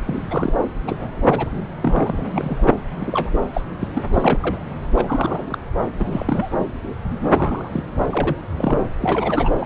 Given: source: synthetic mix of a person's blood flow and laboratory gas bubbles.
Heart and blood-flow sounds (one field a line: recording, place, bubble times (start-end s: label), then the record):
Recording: Doppler ultrasound of blood flow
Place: subclavian vein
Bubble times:
0.02-0.54 s: bubbles
0.86-1.50 s: bubbles
1.81-2.77 s: bubbles
3.00-3.30 s: bubbles
3.54-3.62 s: bubbles
3.79-3.88 s: bubbles
3.94-4.03 s: bubbles
4.12-4.64 s: bubbles
4.95-5.58 s: bubbles
6.00-6.55 s: bubbles
6.61-6.67 s: bubbles
7.09-7.70 s: bubbles
7.73-7.86 s: bubbles
8.04-8.06 s: bubbles
8.10-8.36 s: bubbles
8.57-8.79 s: bubbles
9.00-9.50 s: bubbles
9.58-9.66 s: bubbles
From the record:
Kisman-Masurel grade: 242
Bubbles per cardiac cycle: several, 3 to 8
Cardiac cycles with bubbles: 100%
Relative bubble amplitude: moderate (0.250 to 0.450)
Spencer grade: 3 (all of the cardiac periods contain showers or single bubble signals, but not dominating or overriding the cardiac motion signals)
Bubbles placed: anywhere in the cardiac cycle